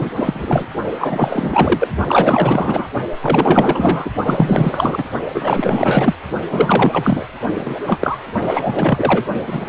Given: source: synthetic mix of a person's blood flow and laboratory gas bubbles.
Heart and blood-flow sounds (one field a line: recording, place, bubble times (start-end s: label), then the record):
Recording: Doppler ultrasound of blood flow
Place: precordium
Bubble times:
0.00-0.10 s: bubbles
0.15-0.66 s: bubbles
0.99-1.88 s: bubbles
2.08-2.88 s: bubbles
3.21-4.10 s: bubbles
4.25-5.05 s: bubbles
5.34-6.16 s: bubbles
6.51-7.26 s: bubbles
7.54-7.75 s: bubbles
7.86-8.18 s: bubbles
8.41-9.24 s: bubbles
9.46-9.69 s: bubbles
From the record:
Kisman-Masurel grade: 444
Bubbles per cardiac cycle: continuous sound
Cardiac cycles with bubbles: 100%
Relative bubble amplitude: maximal (0.775 to 0.999)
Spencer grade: 4 (maximum detectable bubble signal sounding continuously throughout systole and diastole of every cardiac period, and overriding the amplitude of the normal cardiac signals)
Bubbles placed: only in the low amplitude regions of the cardiac cycle